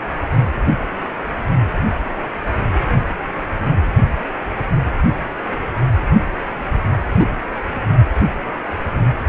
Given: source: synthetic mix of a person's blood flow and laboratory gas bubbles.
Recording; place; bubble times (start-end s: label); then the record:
Doppler ultrasound of blood flow; precordium
7.19-7.26 s: bubbles
From the record:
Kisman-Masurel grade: 113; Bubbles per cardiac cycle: 1 to 2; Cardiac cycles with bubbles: 1 to 10%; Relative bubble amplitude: loud (0.450 to 0.775); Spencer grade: 1 (occasional bubble signal discernible with the cardiac motion signal, with majority of cardiac periods free of bubbles); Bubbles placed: anywhere in the cardiac cycle